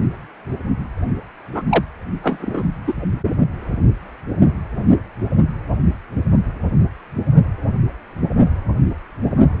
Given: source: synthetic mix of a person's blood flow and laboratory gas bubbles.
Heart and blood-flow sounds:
Doppler ultrasound of blood flow; precordium
1.54-1.62 s: bubbles
1.69-1.84 s: bubbles
2.22-2.63 s: bubbles
2.87-2.93 s: bubbles
From the record:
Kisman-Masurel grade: 123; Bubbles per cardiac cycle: 1 to 2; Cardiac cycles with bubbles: 10 to 50%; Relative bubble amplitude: loud (0.450 to 0.775); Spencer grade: 2 (many but less than half of the cardiac periods contain bubble signals, singularly or in groups); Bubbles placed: only in the low amplitude regions of the cardiac cycle

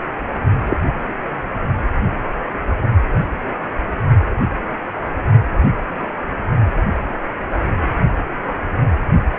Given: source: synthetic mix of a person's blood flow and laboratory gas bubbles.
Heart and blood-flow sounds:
Doppler ultrasound of blood flow; precordium
0.67-0.77 s: bubbles
From the record:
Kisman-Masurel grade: 113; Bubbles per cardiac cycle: 1 to 2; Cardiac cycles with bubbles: 1 to 10%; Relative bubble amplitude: loud (0.450 to 0.775); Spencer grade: 1 (occasional bubble signal discernible with the cardiac motion signal, with majority of cardiac periods free of bubbles); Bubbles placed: only in the low amplitude regions of the cardiac cycle

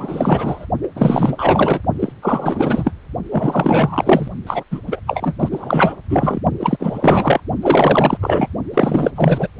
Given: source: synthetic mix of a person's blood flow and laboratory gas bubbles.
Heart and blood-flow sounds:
Doppler ultrasound of blood flow; precordium
0.00-0.66 s: bubbles
0.82-0.88 s: bubbles
0.96-1.81 s: bubbles
1.99-2.12 s: bubbles
2.22-2.92 s: bubbles
3.31-4.28 s: bubbles
4.46-4.64 s: bubbles
4.71-4.80 s: bubbles
4.87-5.00 s: bubbles
5.06-5.34 s: bubbles
5.39-5.93 s: bubbles
6.09-6.40 s: bubbles
6.59-7.40 s: bubbles
7.62-8.17 s: bubbles
8.21-8.48 s: bubbles
8.72-9.11 s: bubbles
9.15-9.47 s: bubbles
From the record:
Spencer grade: 4 (maximum detectable bubble signal sounding continuously throughout systole and diastole of every cardiac period, and overriding the amplitude of the normal cardiac signals); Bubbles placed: only in the low amplitude regions of the cardiac cycle

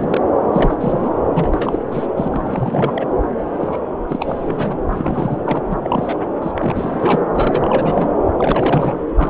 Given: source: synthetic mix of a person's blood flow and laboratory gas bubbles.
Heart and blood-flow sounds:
Doppler ultrasound of blood flow; subclavian vein
0.00-0.21 s: bubbles
0.52-0.76 s: bubbles
0.80-1.17 s: bubbles
1.33-1.79 s: bubbles
1.92-2.08 s: bubbles
2.17-2.28 s: bubbles
2.31-3.06 s: bubbles
3.53-3.79 s: bubbles
4.08-4.77 s: bubbles
4.89-5.38 s: bubbles
5.45-5.61 s: bubbles
5.70-5.78 s: bubbles
5.83-6.17 s: bubbles
6.42-6.51 s: bubbles
6.55-7.22 s: bubbles
7.33-8.11 s: bubbles
8.37-9.01 s: bubbles
9.15-9.30 s: bubbles
From the record:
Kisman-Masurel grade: 342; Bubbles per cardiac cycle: rolling drumbeat, 9 or more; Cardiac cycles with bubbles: 100%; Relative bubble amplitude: moderate (0.250 to 0.450); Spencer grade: 3 (all of the cardiac periods contain showers or single bubble signals, but not dominating or overriding the cardiac motion signals); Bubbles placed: anywhere in the cardiac cycle

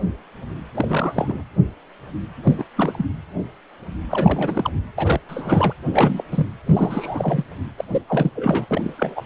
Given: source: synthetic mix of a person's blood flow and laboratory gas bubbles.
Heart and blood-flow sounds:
Doppler ultrasound of blood flow; precordium
0.75-1.44 s: bubbles
2.44-2.55 s: bubbles
2.58-2.65 s: bubbles
2.75-3.06 s: bubbles
4.09-4.71 s: bubbles
4.98-5.20 s: bubbles
5.29-5.73 s: bubbles
5.91-6.25 s: bubbles
6.32-6.47 s: bubbles
6.66-7.44 s: bubbles
7.78-7.85 s: bubbles
7.89-8.02 s: bubbles
8.07-8.30 s: bubbles
8.35-8.66 s: bubbles
8.71-9.23 s: bubbles
From the record:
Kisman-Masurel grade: 332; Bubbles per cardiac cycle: rolling drumbeat, 9 or more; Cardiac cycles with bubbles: 50 to 99%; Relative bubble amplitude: moderate (0.250 to 0.450); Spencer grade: 3 (all of the cardiac periods contain showers or single bubble signals, but not dominating or overriding the cardiac motion signals); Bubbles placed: anywhere in the cardiac cycle

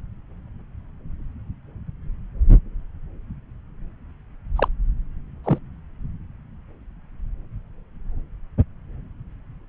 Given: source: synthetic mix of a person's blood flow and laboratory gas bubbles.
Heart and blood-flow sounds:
Doppler ultrasound of blood flow; subclavian vein
4.56-4.68 s: bubbles
5.44-5.58 s: bubbles
From the record:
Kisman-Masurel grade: 122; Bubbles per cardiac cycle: 1 to 2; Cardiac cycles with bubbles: 10 to 50%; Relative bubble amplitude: moderate (0.250 to 0.450); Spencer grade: 2 (many but less than half of the cardiac periods contain bubble signals, singularly or in groups); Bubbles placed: anywhere in the cardiac cycle

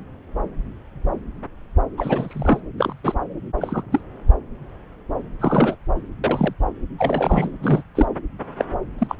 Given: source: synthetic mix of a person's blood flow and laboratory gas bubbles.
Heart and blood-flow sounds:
Doppler ultrasound of blood flow; subclavian vein
1.97-2.60 s: bubbles
2.78-2.94 s: bubbles
3.03-3.14 s: bubbles
3.61-3.83 s: bubbles
3.91-4.00 s: bubbles
5.40-5.75 s: bubbles
6.24-6.54 s: bubbles
6.98-7.50 s: bubbles
7.62-7.82 s: bubbles
7.95-8.06 s: bubbles
8.56-8.65 s: bubbles
8.98-9.15 s: bubbles
From the record:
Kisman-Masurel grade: 232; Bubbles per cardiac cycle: several, 3 to 8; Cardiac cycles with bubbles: 50 to 99%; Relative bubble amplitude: moderate (0.250 to 0.450); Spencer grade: 3 (all of the cardiac periods contain showers or single bubble signals, but not dominating or overriding the cardiac motion signals); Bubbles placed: anywhere in the cardiac cycle

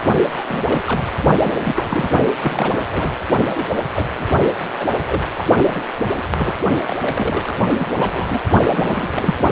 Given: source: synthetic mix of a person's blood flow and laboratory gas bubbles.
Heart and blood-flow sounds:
Doppler ultrasound of blood flow; precordium
0.00-0.03 s: bubbles
0.29-0.44 s: bubbles
0.47-0.81 s: bubbles
0.86-1.02 s: bubbles
1.42-2.10 s: bubbles
2.42-2.79 s: bubbles
2.92-3.13 s: bubbles
3.50-3.66 s: bubbles
3.95-4.05 s: bubbles
4.18-4.27 s: bubbles
4.78-4.88 s: bubbles
4.96-5.43 s: bubbles
5.58-5.83 s: bubbles
6.17-6.22 s: bubbles
6.36-6.54 s: bubbles
6.87-6.96 s: bubbles
7.00-7.58 s: bubbles
7.78-7.90 s: bubbles
7.95-8.40 s: bubbles
8.71-9.12 s: bubbles
9.15-9.35 s: bubbles
From the record:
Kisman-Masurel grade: 242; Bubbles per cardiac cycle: several, 3 to 8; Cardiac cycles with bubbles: 100%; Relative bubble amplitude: moderate (0.250 to 0.450); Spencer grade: 3 (all of the cardiac periods contain showers or single bubble signals, but not dominating or overriding the cardiac motion signals); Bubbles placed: only in the low amplitude regions of the cardiac cycle

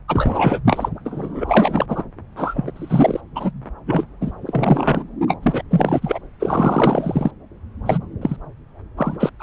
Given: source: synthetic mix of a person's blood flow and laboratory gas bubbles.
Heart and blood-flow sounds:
Doppler ultrasound of blood flow; subclavian vein
0.08-0.60 s: bubbles
0.65-0.89 s: bubbles
1.05-2.03 s: bubbles
2.36-2.71 s: bubbles
2.75-3.21 s: bubbles
3.35-3.52 s: bubbles
3.86-4.04 s: bubbles
4.21-4.31 s: bubbles
4.45-5.04 s: bubbles
5.28-5.37 s: bubbles
5.43-5.62 s: bubbles
5.70-6.19 s: bubbles
6.39-7.31 s: bubbles
7.86-7.98 s: bubbles
8.21-8.37 s: bubbles
8.97-9.16 s: bubbles
9.19-9.30 s: bubbles
9.39-9.43 s: bubbles
From the record:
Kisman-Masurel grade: 333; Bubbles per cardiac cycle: rolling drumbeat, 9 or more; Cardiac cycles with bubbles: 50 to 99%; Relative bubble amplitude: loud (0.450 to 0.775); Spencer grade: 3 (all of the cardiac periods contain showers or single bubble signals, but not dominating or overriding the cardiac motion signals); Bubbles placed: anywhere in the cardiac cycle

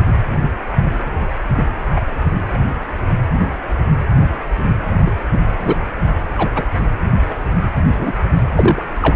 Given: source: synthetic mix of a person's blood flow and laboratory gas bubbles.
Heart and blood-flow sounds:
Doppler ultrasound of blood flow; precordium
1.49-1.65 s: bubbles
1.96-2.02 s: bubbles
5.05-5.11 s: bubbles
5.61-5.75 s: bubbles
6.34-6.51 s: bubbles
6.54-6.64 s: bubbles
7.97-8.12 s: bubbles
8.55-8.82 s: bubbles
9.01-9.16 s: bubbles
From the record:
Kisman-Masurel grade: 123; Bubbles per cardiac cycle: 1 to 2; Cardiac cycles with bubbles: 10 to 50%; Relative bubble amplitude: loud (0.450 to 0.775); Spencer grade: 2 (many but less than half of the cardiac periods contain bubble signals, singularly or in groups); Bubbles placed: anywhere in the cardiac cycle

